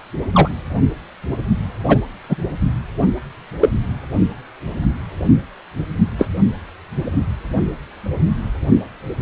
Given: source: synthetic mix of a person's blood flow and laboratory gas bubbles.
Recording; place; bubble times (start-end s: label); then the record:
Doppler ultrasound of blood flow; precordium
0.33-0.49 s: bubbles
1.87-1.99 s: bubbles
2.29-2.36 s: bubbles
3.60-3.70 s: bubbles
6.18-6.28 s: bubbles
From the record:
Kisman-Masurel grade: 123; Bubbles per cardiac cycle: 1 to 2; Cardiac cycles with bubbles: 10 to 50%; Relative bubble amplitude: loud (0.450 to 0.775); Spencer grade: 2 (many but less than half of the cardiac periods contain bubble signals, singularly or in groups); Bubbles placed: only in the low amplitude regions of the cardiac cycle